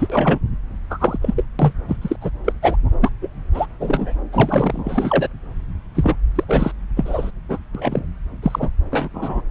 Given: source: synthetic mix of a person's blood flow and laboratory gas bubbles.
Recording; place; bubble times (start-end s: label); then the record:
Doppler ultrasound of blood flow; subclavian vein
0.00-0.07 s: bubbles
0.10-0.39 s: bubbles
0.90-1.18 s: bubbles
1.22-1.44 s: bubbles
1.59-1.73 s: bubbles
1.88-1.97 s: bubbles
2.01-2.16 s: bubbles
2.21-2.30 s: bubbles
2.44-2.52 s: bubbles
2.62-2.76 s: bubbles
3.01-3.10 s: bubbles
3.21-3.29 s: bubbles
3.54-3.66 s: bubbles
3.80-4.15 s: bubbles
4.32-5.28 s: bubbles
5.95-6.16 s: bubbles
6.35-6.44 s: bubbles
6.48-6.71 s: bubbles
6.96-7.32 s: bubbles
7.49-7.58 s: bubbles
7.75-8.07 s: bubbles
8.42-8.69 s: bubbles
8.90-9.08 s: bubbles
9.13-9.41 s: bubbles
From the record:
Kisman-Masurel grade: 233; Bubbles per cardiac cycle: several, 3 to 8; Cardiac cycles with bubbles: 50 to 99%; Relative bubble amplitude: loud (0.450 to 0.775); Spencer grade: 3 (all of the cardiac periods contain showers or single bubble signals, but not dominating or overriding the cardiac motion signals); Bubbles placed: anywhere in the cardiac cycle